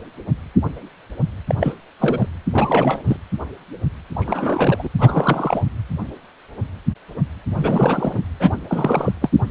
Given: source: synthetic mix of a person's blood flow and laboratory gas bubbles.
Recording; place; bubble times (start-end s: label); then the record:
Doppler ultrasound of blood flow; precordium
1.47-1.55 s: bubbles
1.60-1.75 s: bubbles
2.00-2.28 s: bubbles
2.54-3.02 s: bubbles
3.07-3.17 s: bubbles
4.13-4.89 s: bubbles
4.99-5.62 s: bubbles
7.55-8.22 s: bubbles
8.40-8.51 s: bubbles
8.68-9.12 s: bubbles
9.21-9.30 s: bubbles
From the record:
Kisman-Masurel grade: 332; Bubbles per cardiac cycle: rolling drumbeat, 9 or more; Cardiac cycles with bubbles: 50 to 99%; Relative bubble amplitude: moderate (0.250 to 0.450); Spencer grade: 3 (all of the cardiac periods contain showers or single bubble signals, but not dominating or overriding the cardiac motion signals); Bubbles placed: anywhere in the cardiac cycle